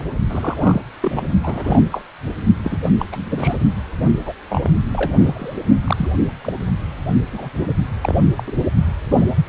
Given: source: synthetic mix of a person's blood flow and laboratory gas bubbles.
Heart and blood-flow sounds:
Doppler ultrasound of blood flow; precordium
0.30-0.84 s: bubbles
1.01-1.25 s: bubbles
1.43-1.82 s: bubbles
1.91-2.02 s: bubbles
2.64-2.77 s: bubbles
2.81-2.90 s: bubbles
2.99-3.06 s: bubbles
3.12-3.57 s: bubbles
4.25-4.33 s: bubbles
4.50-4.71 s: bubbles
4.94-5.12 s: bubbles
5.19-5.54 s: bubbles
5.84-6.09 s: bubbles
6.42-6.52 s: bubbles
7.31-7.49 s: bubbles
8.01-8.16 s: bubbles
8.37-8.44 s: bubbles
8.46-8.52 s: bubbles
9.11-9.25 s: bubbles
From the record:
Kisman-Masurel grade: 242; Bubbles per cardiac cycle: several, 3 to 8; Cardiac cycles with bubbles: 100%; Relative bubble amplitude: moderate (0.250 to 0.450); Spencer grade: 3 (all of the cardiac periods contain showers or single bubble signals, but not dominating or overriding the cardiac motion signals); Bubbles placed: only in the low amplitude regions of the cardiac cycle

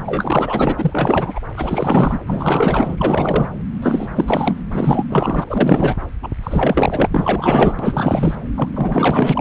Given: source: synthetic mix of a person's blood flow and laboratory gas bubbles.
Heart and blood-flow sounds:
Doppler ultrasound of blood flow; subclavian vein
0.05-1.39 s: bubbles
1.57-2.19 s: bubbles
2.25-3.50 s: bubbles
3.82-4.63 s: bubbles
4.71-5.04 s: bubbles
5.09-5.44 s: bubbles
5.47-5.96 s: bubbles
6.22-6.28 s: bubbles
6.43-7.07 s: bubbles
7.11-7.75 s: bubbles
7.79-8.36 s: bubbles
8.54-9.41 s: bubbles
From the record:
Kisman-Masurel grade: 444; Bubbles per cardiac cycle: continuous sound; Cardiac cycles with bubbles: 100%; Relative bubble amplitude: maximal (0.775 to 0.999); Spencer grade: 4 (maximum detectable bubble signal sounding continuously throughout systole and diastole of every cardiac period, and overriding the amplitude of the normal cardiac signals); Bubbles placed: anywhere in the cardiac cycle

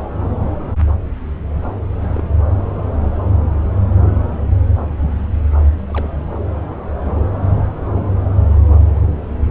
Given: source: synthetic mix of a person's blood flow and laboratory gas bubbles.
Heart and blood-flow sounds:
Doppler ultrasound of blood flow; subclavian vein
1.99-2.24 s: bubbles
5.87-6.25 s: bubbles
From the record:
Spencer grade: 2 (many but less than half of the cardiac periods contain bubble signals, singularly or in groups); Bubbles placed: anywhere in the cardiac cycle

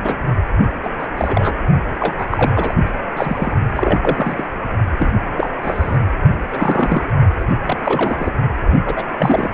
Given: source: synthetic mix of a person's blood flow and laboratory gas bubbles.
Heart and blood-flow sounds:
Doppler ultrasound of blood flow; precordium
0.02-0.18 s: bubbles
0.84-0.90 s: bubbles
0.98-1.07 s: bubbles
1.17-1.58 s: bubbles
2.00-2.15 s: bubbles
2.19-2.26 s: bubbles
2.30-2.75 s: bubbles
3.17-3.52 s: bubbles
3.75-4.44 s: bubbles
4.98-5.11 s: bubbles
5.36-5.50 s: bubbles
5.62-5.99 s: bubbles
6.53-7.08 s: bubbles
7.66-8.32 s: bubbles
8.86-9.05 s: bubbles
9.19-9.50 s: bubbles
From the record:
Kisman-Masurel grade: 232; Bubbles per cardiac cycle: several, 3 to 8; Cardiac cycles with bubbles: 50 to 99%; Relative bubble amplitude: moderate (0.250 to 0.450); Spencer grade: 3 (all of the cardiac periods contain showers or single bubble signals, but not dominating or overriding the cardiac motion signals); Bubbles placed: only in the low amplitude regions of the cardiac cycle

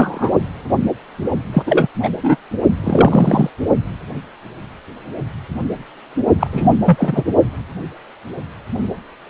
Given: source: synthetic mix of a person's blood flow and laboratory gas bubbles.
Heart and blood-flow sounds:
Doppler ultrasound of blood flow; precordium
0.00-0.31 s: bubbles
1.53-1.62 s: bubbles
1.66-1.88 s: bubbles
2.03-2.10 s: bubbles
2.23-2.36 s: bubbles
2.83-3.50 s: bubbles
6.39-6.47 s: bubbles
6.52-6.70 s: bubbles
6.84-7.23 s: bubbles
From the record:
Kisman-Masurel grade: 223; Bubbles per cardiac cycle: several, 3 to 8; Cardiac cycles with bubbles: 10 to 50%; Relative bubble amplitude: loud (0.450 to 0.775); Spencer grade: 2 (many but less than half of the cardiac periods contain bubble signals, singularly or in groups); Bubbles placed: only in the low amplitude regions of the cardiac cycle

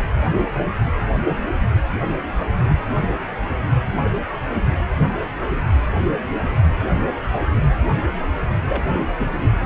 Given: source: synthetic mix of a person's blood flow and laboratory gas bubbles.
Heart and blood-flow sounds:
Doppler ultrasound of blood flow; precordium
8.69-8.83 s: bubbles
8.92-9.05 s: bubbles
9.20-9.35 s: bubbles
9.39-9.51 s: bubbles
From the record:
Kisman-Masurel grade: 212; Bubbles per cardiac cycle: several, 3 to 8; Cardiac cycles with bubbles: 1 to 10%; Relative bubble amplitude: moderate (0.250 to 0.450); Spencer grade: 1 (occasional bubble signal discernible with the cardiac motion signal, with majority of cardiac periods free of bubbles); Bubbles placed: anywhere in the cardiac cycle

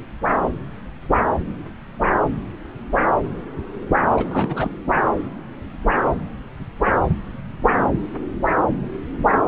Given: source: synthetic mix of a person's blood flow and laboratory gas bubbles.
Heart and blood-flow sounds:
Doppler ultrasound of blood flow; subclavian vein
4.17-4.71 s: bubbles
From the record:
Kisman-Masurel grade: 212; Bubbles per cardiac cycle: several, 3 to 8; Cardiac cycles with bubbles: 1 to 10%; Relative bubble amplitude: moderate (0.250 to 0.450); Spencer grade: 1 (occasional bubble signal discernible with the cardiac motion signal, with majority of cardiac periods free of bubbles); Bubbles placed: anywhere in the cardiac cycle

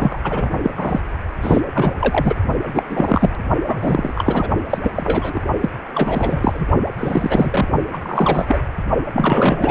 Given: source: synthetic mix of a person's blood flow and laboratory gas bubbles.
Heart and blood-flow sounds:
Doppler ultrasound of blood flow; precordium
0.00-0.19 s: bubbles
0.23-0.48 s: bubbles
0.63-0.70 s: bubbles
0.77-1.00 s: bubbles
1.41-1.61 s: bubbles
1.73-1.93 s: bubbles
1.99-2.35 s: bubbles
2.66-2.83 s: bubbles
2.90-3.29 s: bubbles
3.68-4.48 s: bubbles
4.69-4.78 s: bubbles
4.82-4.92 s: bubbles
4.94-5.41 s: bubbles
5.61-5.69 s: bubbles
5.94-6.66 s: bubbles
6.98-7.68 s: bubbles
7.93-8.59 s: bubbles
9.13-9.71 s: bubbles
From the record:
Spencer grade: 3 (all of the cardiac periods contain showers or single bubble signals, but not dominating or overriding the cardiac motion signals); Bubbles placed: only in the low amplitude regions of the cardiac cycle

